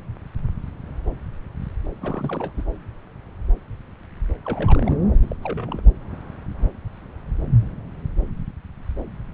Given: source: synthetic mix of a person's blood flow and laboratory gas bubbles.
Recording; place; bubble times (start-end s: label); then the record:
Doppler ultrasound of blood flow; subclavian vein
2.01-2.52 s: bubbles
2.57-2.65 s: bubbles
4.45-4.98 s: bubbles
5.22-5.36 s: bubbles
5.42-5.82 s: bubbles
From the record:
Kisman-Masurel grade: 221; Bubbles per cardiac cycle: several, 3 to 8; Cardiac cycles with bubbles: 10 to 50%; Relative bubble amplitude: barely perceptible (0.100 to 0.250); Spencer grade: 2 (many but less than half of the cardiac periods contain bubble signals, singularly or in groups); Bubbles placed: anywhere in the cardiac cycle